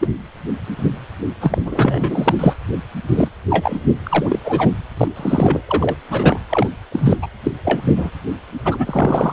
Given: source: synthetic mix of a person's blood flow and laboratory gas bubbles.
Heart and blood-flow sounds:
Doppler ultrasound of blood flow; precordium
0.00-0.08 s: bubbles
1.41-1.60 s: bubbles
1.65-2.35 s: bubbles
2.39-2.54 s: bubbles
3.08-3.29 s: bubbles
3.50-3.79 s: bubbles
4.03-4.39 s: bubbles
4.44-4.69 s: bubbles
4.97-5.08 s: bubbles
5.16-5.61 s: bubbles
5.67-5.96 s: bubbles
6.10-6.39 s: bubbles
6.49-6.67 s: bubbles
6.92-7.18 s: bubbles
7.22-7.27 s: bubbles
7.43-7.52 s: bubbles
7.64-8.10 s: bubbles
8.65-9.33 s: bubbles
From the record:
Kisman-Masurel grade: 243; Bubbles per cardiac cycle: several, 3 to 8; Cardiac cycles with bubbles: 100%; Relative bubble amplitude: loud (0.450 to 0.775); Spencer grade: 3 (all of the cardiac periods contain showers or single bubble signals, but not dominating or overriding the cardiac motion signals); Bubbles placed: anywhere in the cardiac cycle

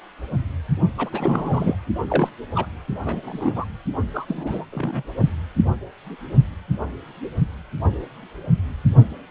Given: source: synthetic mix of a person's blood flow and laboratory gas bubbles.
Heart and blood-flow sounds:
Doppler ultrasound of blood flow; precordium
0.98-1.09 s: bubbles
1.12-1.75 s: bubbles
2.08-2.29 s: bubbles
2.54-2.67 s: bubbles
3.04-3.65 s: bubbles
4.14-4.26 s: bubbles
4.28-4.65 s: bubbles
4.72-5.03 s: bubbles
From the record:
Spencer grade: 2 (many but less than half of the cardiac periods contain bubble signals, singularly or in groups); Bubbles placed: only in the low amplitude regions of the cardiac cycle

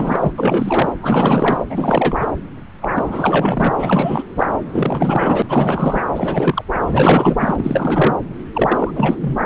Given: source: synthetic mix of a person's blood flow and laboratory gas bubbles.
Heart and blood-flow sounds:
Doppler ultrasound of blood flow; subclavian vein
0.00-0.32 s: bubbles
0.38-0.93 s: bubbles
1.01-1.57 s: bubbles
1.70-2.29 s: bubbles
2.80-2.89 s: bubbles
2.95-3.73 s: bubbles
3.78-4.23 s: bubbles
4.36-4.46 s: bubbles
4.73-5.42 s: bubbles
5.48-6.03 s: bubbles
6.14-6.65 s: bubbles
6.82-8.15 s: bubbles
8.53-9.37 s: bubbles
9.43-9.46 s: bubbles
From the record:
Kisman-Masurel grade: 444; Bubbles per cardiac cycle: continuous sound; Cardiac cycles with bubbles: 100%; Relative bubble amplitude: maximal (0.775 to 0.999); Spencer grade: 4 (maximum detectable bubble signal sounding continuously throughout systole and diastole of every cardiac period, and overriding the amplitude of the normal cardiac signals); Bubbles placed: anywhere in the cardiac cycle

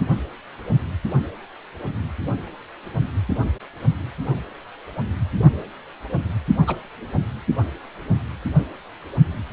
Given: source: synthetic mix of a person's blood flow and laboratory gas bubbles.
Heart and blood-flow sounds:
Doppler ultrasound of blood flow; precordium
6.67-6.75 s: bubbles
From the record:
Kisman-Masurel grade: 112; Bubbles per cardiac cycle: 1 to 2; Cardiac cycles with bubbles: 1 to 10%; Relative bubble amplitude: moderate (0.250 to 0.450); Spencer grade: 1 (occasional bubble signal discernible with the cardiac motion signal, with majority of cardiac periods free of bubbles); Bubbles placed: only in the low amplitude regions of the cardiac cycle

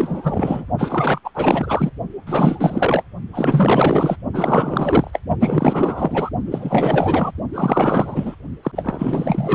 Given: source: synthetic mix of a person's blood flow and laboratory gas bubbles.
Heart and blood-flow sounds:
Doppler ultrasound of blood flow; precordium
0.00-0.65 s: bubbles
0.78-1.21 s: bubbles
1.24-1.30 s: bubbles
1.34-1.91 s: bubbles
2.26-3.04 s: bubbles
3.33-4.17 s: bubbles
4.33-5.20 s: bubbles
5.40-6.30 s: bubbles
6.46-7.31 s: bubbles
7.53-8.36 s: bubbles
8.63-8.71 s: bubbles
8.76-9.55 s: bubbles
From the record:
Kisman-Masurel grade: 444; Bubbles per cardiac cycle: continuous sound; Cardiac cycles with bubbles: 100%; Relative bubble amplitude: maximal (0.775 to 0.999); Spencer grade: 4 (maximum detectable bubble signal sounding continuously throughout systole and diastole of every cardiac period, and overriding the amplitude of the normal cardiac signals); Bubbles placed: only in the low amplitude regions of the cardiac cycle

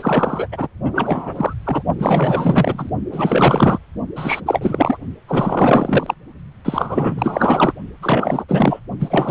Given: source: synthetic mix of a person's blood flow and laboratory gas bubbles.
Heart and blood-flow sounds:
Doppler ultrasound of blood flow; precordium
0.00-0.47 s: bubbles
0.52-0.67 s: bubbles
0.84-1.54 s: bubbles
1.64-1.82 s: bubbles
1.99-2.90 s: bubbles
3.11-3.78 s: bubbles
4.16-4.41 s: bubbles
4.46-4.98 s: bubbles
5.28-6.14 s: bubbles
6.65-7.74 s: bubbles
8.02-8.44 s: bubbles
8.48-8.80 s: bubbles
8.99-9.31 s: bubbles
From the record:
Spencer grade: 4 (maximum detectable bubble signal sounding continuously throughout systole and diastole of every cardiac period, and overriding the amplitude of the normal cardiac signals); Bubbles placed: only in the low amplitude regions of the cardiac cycle

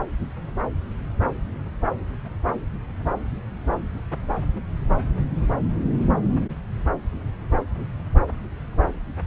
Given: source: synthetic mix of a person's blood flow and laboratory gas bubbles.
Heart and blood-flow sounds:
Doppler ultrasound of blood flow; subclavian vein
no bubbles
From the record:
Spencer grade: 0 (complete lack of bubble signals)

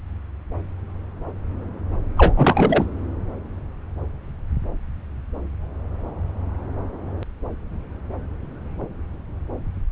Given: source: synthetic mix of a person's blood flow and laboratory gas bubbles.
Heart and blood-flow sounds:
Doppler ultrasound of blood flow; subclavian vein
2.17-2.34 s: bubbles
2.37-2.87 s: bubbles
From the record:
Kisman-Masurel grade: 213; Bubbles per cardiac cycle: several, 3 to 8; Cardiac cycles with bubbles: 1 to 10%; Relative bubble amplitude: loud (0.450 to 0.775); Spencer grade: 1 (occasional bubble signal discernible with the cardiac motion signal, with majority of cardiac periods free of bubbles); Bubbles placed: anywhere in the cardiac cycle

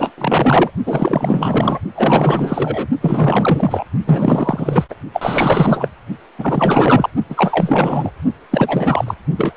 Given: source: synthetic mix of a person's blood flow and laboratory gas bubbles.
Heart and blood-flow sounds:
Doppler ultrasound of blood flow; precordium
0.00-0.12 s: bubbles
0.17-0.71 s: bubbles
0.85-1.79 s: bubbles
1.95-2.87 s: bubbles
3.00-3.84 s: bubbles
4.05-4.85 s: bubbles
4.90-4.95 s: bubbles
5.13-5.89 s: bubbles
6.38-7.10 s: bubbles
7.29-8.11 s: bubbles
8.50-9.14 s: bubbles
9.37-9.54 s: bubbles
From the record:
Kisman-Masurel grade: 444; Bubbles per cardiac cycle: continuous sound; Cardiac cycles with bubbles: 100%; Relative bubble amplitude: maximal (0.775 to 0.999); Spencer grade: 4 (maximum detectable bubble signal sounding continuously throughout systole and diastole of every cardiac period, and overriding the amplitude of the normal cardiac signals); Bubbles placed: only in the low amplitude regions of the cardiac cycle

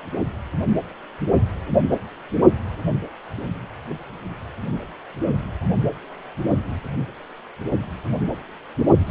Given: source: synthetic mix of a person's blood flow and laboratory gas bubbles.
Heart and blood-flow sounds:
Doppler ultrasound of blood flow; precordium
9.06-9.11 s: bubbles
From the record:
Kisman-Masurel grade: 222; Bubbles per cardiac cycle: several, 3 to 8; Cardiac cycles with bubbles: 10 to 50%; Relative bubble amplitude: moderate (0.250 to 0.450); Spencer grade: 2 (many but less than half of the cardiac periods contain bubble signals, singularly or in groups); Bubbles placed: only in the low amplitude regions of the cardiac cycle

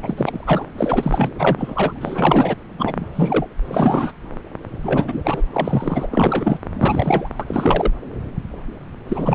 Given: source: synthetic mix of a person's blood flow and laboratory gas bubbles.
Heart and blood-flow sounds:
Doppler ultrasound of blood flow; subclavian vein
0.02-0.14 s: bubbles
0.17-0.69 s: bubbles
0.77-1.30 s: bubbles
1.39-1.92 s: bubbles
2.00-2.56 s: bubbles
2.79-3.46 s: bubbles
3.65-4.12 s: bubbles
4.83-5.42 s: bubbles
5.53-6.07 s: bubbles
6.11-6.58 s: bubbles
6.74-7.29 s: bubbles
7.40-7.91 s: bubbles
9.07-9.35 s: bubbles
From the record:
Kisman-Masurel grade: 333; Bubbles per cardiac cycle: rolling drumbeat, 9 or more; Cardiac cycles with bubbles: 50 to 99%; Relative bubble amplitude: loud (0.450 to 0.775); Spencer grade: 3 (all of the cardiac periods contain showers or single bubble signals, but not dominating or overriding the cardiac motion signals); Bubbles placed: anywhere in the cardiac cycle

